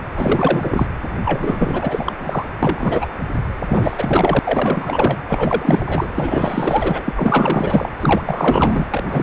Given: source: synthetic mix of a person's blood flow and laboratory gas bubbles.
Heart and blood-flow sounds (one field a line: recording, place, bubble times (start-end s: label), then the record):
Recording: Doppler ultrasound of blood flow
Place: precordium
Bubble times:
0.16-0.86 s: bubbles
1.24-2.12 s: bubbles
2.17-2.46 s: bubbles
2.62-3.06 s: bubbles
3.67-4.39 s: bubbles
4.45-5.24 s: bubbles
5.29-6.07 s: bubbles
6.15-7.91 s: bubbles
8.00-8.21 s: bubbles
8.25-8.90 s: bubbles
8.93-9.23 s: bubbles
From the record:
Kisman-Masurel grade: 444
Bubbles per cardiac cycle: continuous sound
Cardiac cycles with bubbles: 100%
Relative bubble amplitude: maximal (0.775 to 0.999)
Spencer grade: 4 (maximum detectable bubble signal sounding continuously throughout systole and diastole of every cardiac period, and overriding the amplitude of the normal cardiac signals)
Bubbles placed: anywhere in the cardiac cycle